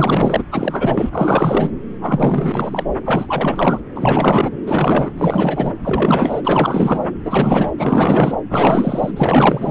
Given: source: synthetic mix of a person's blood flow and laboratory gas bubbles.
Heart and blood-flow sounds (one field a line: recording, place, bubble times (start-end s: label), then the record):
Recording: Doppler ultrasound of blood flow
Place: subclavian vein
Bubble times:
0.00-0.45 s: bubbles
0.51-1.70 s: bubbles
2.00-2.85 s: bubbles
3.05-3.82 s: bubbles
3.96-4.50 s: bubbles
4.66-5.12 s: bubbles
5.17-5.73 s: bubbles
5.83-6.42 s: bubbles
6.45-7.08 s: bubbles
7.25-7.71 s: bubbles
7.78-8.38 s: bubbles
8.49-9.11 s: bubbles
9.16-9.71 s: bubbles
From the record:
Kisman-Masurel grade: 444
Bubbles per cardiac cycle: continuous sound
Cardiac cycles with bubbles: 100%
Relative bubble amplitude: maximal (0.775 to 0.999)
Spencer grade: 4 (maximum detectable bubble signal sounding continuously throughout systole and diastole of every cardiac period, and overriding the amplitude of the normal cardiac signals)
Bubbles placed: anywhere in the cardiac cycle